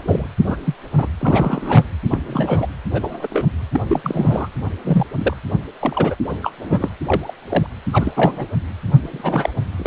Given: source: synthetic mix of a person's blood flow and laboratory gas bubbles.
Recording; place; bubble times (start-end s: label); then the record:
Doppler ultrasound of blood flow; precordium
0.00-0.27 s: bubbles
0.44-0.56 s: bubbles
0.64-0.74 s: bubbles
0.97-1.06 s: bubbles
1.20-1.85 s: bubbles
2.11-2.18 s: bubbles
2.26-2.67 s: bubbles
2.92-3.27 s: bubbles
3.30-3.46 s: bubbles
3.74-3.81 s: bubbles
3.88-4.00 s: bubbles
4.03-4.48 s: bubbles
4.84-5.04 s: bubbles
5.17-5.34 s: bubbles
5.81-6.15 s: bubbles
6.29-6.36 s: bubbles
6.42-6.52 s: bubbles
6.63-6.89 s: bubbles
7.05-7.33 s: bubbles
7.49-7.67 s: bubbles
7.92-8.12 s: bubbles
8.16-8.46 s: bubbles
9.02-9.49 s: bubbles
9.79-9.87 s: bubbles
From the record:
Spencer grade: 3 (all of the cardiac periods contain showers or single bubble signals, but not dominating or overriding the cardiac motion signals); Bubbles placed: anywhere in the cardiac cycle